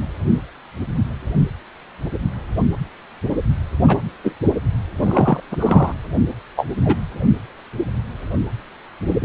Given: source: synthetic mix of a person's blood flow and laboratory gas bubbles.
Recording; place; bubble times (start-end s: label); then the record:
Doppler ultrasound of blood flow; precordium
3.87-3.98 s: bubbles
4.23-4.34 s: bubbles
5.00-5.40 s: bubbles
5.49-5.92 s: bubbles
6.56-6.67 s: bubbles
6.85-6.96 s: bubbles
9.05-9.25 s: bubbles
From the record:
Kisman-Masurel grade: 123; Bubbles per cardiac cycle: 1 to 2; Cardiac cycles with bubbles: 10 to 50%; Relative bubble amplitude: loud (0.450 to 0.775); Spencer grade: 2 (many but less than half of the cardiac periods contain bubble signals, singularly or in groups); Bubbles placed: anywhere in the cardiac cycle